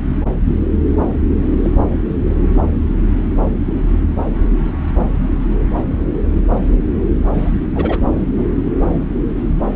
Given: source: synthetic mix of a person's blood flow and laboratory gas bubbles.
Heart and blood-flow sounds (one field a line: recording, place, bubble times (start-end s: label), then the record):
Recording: Doppler ultrasound of blood flow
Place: subclavian vein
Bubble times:
1.62-1.71 s: bubbles
7.33-7.60 s: bubbles
7.75-7.99 s: bubbles
8.38-8.44 s: bubbles
From the record:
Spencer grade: 2 (many but less than half of the cardiac periods contain bubble signals, singularly or in groups)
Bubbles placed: anywhere in the cardiac cycle